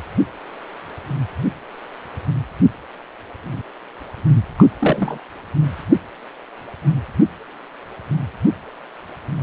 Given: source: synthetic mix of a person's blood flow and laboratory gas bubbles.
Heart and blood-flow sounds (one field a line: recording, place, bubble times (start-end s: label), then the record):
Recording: Doppler ultrasound of blood flow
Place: precordium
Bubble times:
4.57-4.70 s: bubbles
4.79-5.18 s: bubbles
From the record:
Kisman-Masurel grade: 113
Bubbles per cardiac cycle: 1 to 2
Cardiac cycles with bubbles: 1 to 10%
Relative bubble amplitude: loud (0.450 to 0.775)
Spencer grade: 1 (occasional bubble signal discernible with the cardiac motion signal, with majority of cardiac periods free of bubbles)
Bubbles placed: anywhere in the cardiac cycle